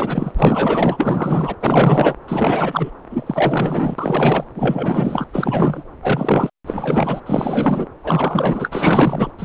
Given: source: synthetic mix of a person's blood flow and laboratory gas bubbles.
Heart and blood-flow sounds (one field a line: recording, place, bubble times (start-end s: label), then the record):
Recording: Doppler ultrasound of blood flow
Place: subclavian vein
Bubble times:
0.00-0.32 s: bubbles
0.35-1.56 s: bubbles
1.60-2.15 s: bubbles
2.28-2.90 s: bubbles
3.10-3.95 s: bubbles
3.98-4.44 s: bubbles
4.55-5.24 s: bubbles
5.33-5.85 s: bubbles
6.02-6.50 s: bubbles
6.66-7.21 s: bubbles
7.26-7.86 s: bubbles
8.03-9.30 s: bubbles
9.38-9.45 s: bubbles
From the record:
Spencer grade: 4 (maximum detectable bubble signal sounding continuously throughout systole and diastole of every cardiac period, and overriding the amplitude of the normal cardiac signals)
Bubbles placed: anywhere in the cardiac cycle